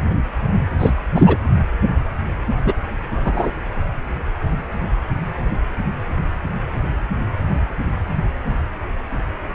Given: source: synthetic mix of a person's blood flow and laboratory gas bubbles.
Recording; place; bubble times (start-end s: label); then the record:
Doppler ultrasound of blood flow; precordium
0.79-0.91 s: bubbles
1.15-1.37 s: bubbles
2.65-2.74 s: bubbles
3.25-3.52 s: bubbles
From the record:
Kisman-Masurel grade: 213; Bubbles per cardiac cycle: several, 3 to 8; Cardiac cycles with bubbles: 1 to 10%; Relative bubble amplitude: loud (0.450 to 0.775); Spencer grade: 1 (occasional bubble signal discernible with the cardiac motion signal, with majority of cardiac periods free of bubbles); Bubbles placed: anywhere in the cardiac cycle